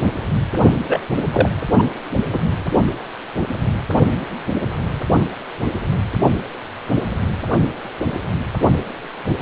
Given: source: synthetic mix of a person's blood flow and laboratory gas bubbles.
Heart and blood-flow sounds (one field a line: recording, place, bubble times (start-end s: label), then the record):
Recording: Doppler ultrasound of blood flow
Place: precordium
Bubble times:
0.85-1.06 s: bubbles
1.33-1.49 s: bubbles
1.77-1.83 s: bubbles
2.31-2.38 s: bubbles
From the record:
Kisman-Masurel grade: 213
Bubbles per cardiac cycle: several, 3 to 8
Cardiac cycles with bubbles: 1 to 10%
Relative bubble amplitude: loud (0.450 to 0.775)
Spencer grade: 1 (occasional bubble signal discernible with the cardiac motion signal, with majority of cardiac periods free of bubbles)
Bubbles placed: only in the low amplitude regions of the cardiac cycle